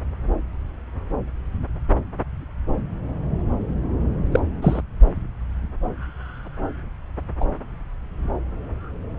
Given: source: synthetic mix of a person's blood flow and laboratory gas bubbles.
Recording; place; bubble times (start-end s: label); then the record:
Doppler ultrasound of blood flow; subclavian vein
4.31-4.40 s: bubbles
4.61-4.81 s: bubbles
7.40-7.45 s: bubbles
From the record:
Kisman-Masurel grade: 122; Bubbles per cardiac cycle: 1 to 2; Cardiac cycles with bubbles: 10 to 50%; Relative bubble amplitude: moderate (0.250 to 0.450); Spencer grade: 2 (many but less than half of the cardiac periods contain bubble signals, singularly or in groups); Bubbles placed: anywhere in the cardiac cycle